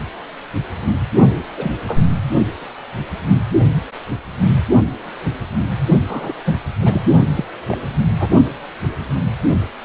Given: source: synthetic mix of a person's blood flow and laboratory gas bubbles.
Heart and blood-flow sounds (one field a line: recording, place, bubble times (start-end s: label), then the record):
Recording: Doppler ultrasound of blood flow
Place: precordium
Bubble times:
1.57-1.72 s: bubbles
1.88-2.00 s: bubbles
2.39-2.46 s: bubbles
6.07-6.34 s: bubbles
6.44-6.57 s: bubbles
6.79-7.01 s: bubbles
7.35-7.45 s: bubbles
7.68-7.78 s: bubbles
8.20-8.29 s: bubbles
From the record:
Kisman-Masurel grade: 222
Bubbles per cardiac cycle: several, 3 to 8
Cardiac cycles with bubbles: 10 to 50%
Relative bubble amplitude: moderate (0.250 to 0.450)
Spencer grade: 2 (many but less than half of the cardiac periods contain bubble signals, singularly or in groups)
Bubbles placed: only in the low amplitude regions of the cardiac cycle